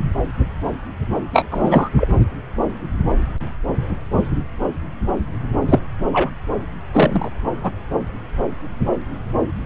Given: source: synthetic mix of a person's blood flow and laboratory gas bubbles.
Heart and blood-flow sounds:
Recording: Doppler ultrasound of blood flow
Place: subclavian vein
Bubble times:
1.33-1.46 s: bubbles
1.51-1.89 s: bubbles
1.96-2.08 s: bubbles
5.67-5.79 s: bubbles
6.12-6.30 s: bubbles
6.93-7.30 s: bubbles
7.63-7.71 s: bubbles
From the record:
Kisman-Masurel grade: 223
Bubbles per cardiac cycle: several, 3 to 8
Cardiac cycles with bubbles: 10 to 50%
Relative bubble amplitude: loud (0.450 to 0.775)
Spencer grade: 2 (many but less than half of the cardiac periods contain bubble signals, singularly or in groups)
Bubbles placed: anywhere in the cardiac cycle

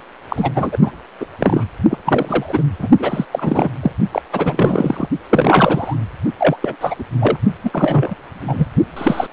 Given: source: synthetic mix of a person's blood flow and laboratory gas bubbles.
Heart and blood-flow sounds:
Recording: Doppler ultrasound of blood flow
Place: precordium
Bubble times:
0.29-0.52 s: bubbles
0.55-0.78 s: bubbles
0.81-0.91 s: bubbles
1.20-1.25 s: bubbles
1.39-1.65 s: bubbles
1.90-1.97 s: bubbles
2.05-2.63 s: bubbles
2.79-2.88 s: bubbles
2.98-3.25 s: bubbles
3.31-3.69 s: bubbles
3.82-3.91 s: bubbles
4.12-4.22 s: bubbles
4.32-5.09 s: bubbles
5.29-5.96 s: bubbles
6.38-6.56 s: bubbles
6.62-6.76 s: bubbles
6.80-6.96 s: bubbles
6.98-7.04 s: bubbles
7.20-7.38 s: bubbles
7.63-8.15 s: bubbles
8.47-8.67 s: bubbles
8.96-9.28 s: bubbles
From the record:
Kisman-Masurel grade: 343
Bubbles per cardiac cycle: rolling drumbeat, 9 or more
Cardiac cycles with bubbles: 100%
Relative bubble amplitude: loud (0.450 to 0.775)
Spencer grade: 3 (all of the cardiac periods contain showers or single bubble signals, but not dominating or overriding the cardiac motion signals)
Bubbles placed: only in the low amplitude regions of the cardiac cycle

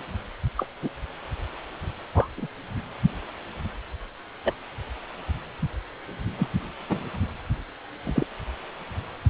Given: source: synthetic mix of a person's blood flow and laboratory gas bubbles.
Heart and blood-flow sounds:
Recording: Doppler ultrasound of blood flow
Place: precordium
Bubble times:
0.56-0.68 s: bubbles
0.81-0.90 s: bubbles
2.14-2.28 s: bubbles
2.37-2.47 s: bubbles
4.44-4.54 s: bubbles
6.38-6.49 s: bubbles
6.89-7.04 s: bubbles
8.04-8.25 s: bubbles
From the record:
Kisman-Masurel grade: 122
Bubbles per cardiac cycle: 1 to 2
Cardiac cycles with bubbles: 10 to 50%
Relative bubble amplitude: moderate (0.250 to 0.450)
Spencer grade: 2 (many but less than half of the cardiac periods contain bubble signals, singularly or in groups)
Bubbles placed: anywhere in the cardiac cycle

